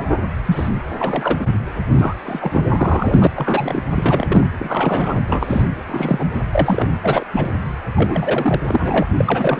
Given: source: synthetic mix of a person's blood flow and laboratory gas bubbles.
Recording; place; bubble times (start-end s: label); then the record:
Doppler ultrasound of blood flow; precordium
0.00-0.11 s: bubbles
0.46-0.70 s: bubbles
0.99-1.58 s: bubbles
1.93-2.61 s: bubbles
2.69-3.27 s: bubbles
3.35-3.81 s: bubbles
3.95-4.46 s: bubbles
4.57-5.17 s: bubbles
5.27-5.62 s: bubbles
5.87-6.25 s: bubbles
6.51-6.92 s: bubbles
7.03-7.24 s: bubbles
7.31-7.52 s: bubbles
7.95-8.60 s: bubbles
8.63-9.07 s: bubbles
9.17-9.60 s: bubbles
From the record:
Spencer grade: 3 (all of the cardiac periods contain showers or single bubble signals, but not dominating or overriding the cardiac motion signals); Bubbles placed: anywhere in the cardiac cycle